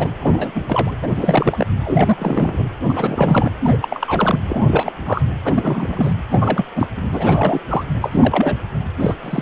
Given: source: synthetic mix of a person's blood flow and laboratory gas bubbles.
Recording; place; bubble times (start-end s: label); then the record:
Doppler ultrasound of blood flow; precordium
0.00-0.08 s: bubbles
0.20-0.51 s: bubbles
0.55-0.61 s: bubbles
0.68-0.91 s: bubbles
1.02-1.67 s: bubbles
1.84-2.17 s: bubbles
2.19-2.67 s: bubbles
2.88-3.51 s: bubbles
3.62-3.77 s: bubbles
3.81-3.88 s: bubbles
3.90-4.40 s: bubbles
4.47-4.92 s: bubbles
5.06-5.22 s: bubbles
5.45-6.15 s: bubbles
6.32-6.65 s: bubbles
6.75-6.88 s: bubbles
6.97-7.06 s: bubbles
7.12-7.61 s: bubbles
7.68-7.84 s: bubbles
8.01-8.57 s: bubbles
8.99-9.14 s: bubbles
9.22-9.42 s: bubbles
From the record:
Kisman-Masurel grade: 342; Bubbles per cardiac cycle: rolling drumbeat, 9 or more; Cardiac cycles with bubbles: 100%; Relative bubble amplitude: moderate (0.250 to 0.450); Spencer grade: 3 (all of the cardiac periods contain showers or single bubble signals, but not dominating or overriding the cardiac motion signals); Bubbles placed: anywhere in the cardiac cycle